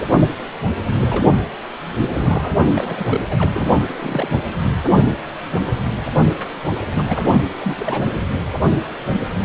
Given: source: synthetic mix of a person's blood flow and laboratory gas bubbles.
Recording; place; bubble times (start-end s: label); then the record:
Doppler ultrasound of blood flow; precordium
0.85-1.33 s: bubbles
2.12-2.51 s: bubbles
2.73-3.21 s: bubbles
3.29-3.75 s: bubbles
4.01-4.44 s: bubbles
6.94-7.44 s: bubbles
7.61-8.08 s: bubbles
From the record:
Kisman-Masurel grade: 221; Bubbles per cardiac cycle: several, 3 to 8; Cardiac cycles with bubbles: 10 to 50%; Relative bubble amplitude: barely perceptible (0.100 to 0.250); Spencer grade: 2 (many but less than half of the cardiac periods contain bubble signals, singularly or in groups); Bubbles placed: anywhere in the cardiac cycle